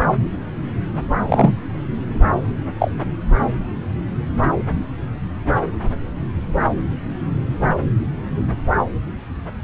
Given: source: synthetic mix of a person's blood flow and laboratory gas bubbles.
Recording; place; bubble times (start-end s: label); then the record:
Doppler ultrasound of blood flow; subclavian vein
1.29-1.55 s: bubbles
2.79-2.93 s: bubbles
From the record:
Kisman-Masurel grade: 123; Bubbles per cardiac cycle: 1 to 2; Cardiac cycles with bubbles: 10 to 50%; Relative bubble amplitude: loud (0.450 to 0.775); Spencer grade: 2 (many but less than half of the cardiac periods contain bubble signals, singularly or in groups); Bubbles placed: anywhere in the cardiac cycle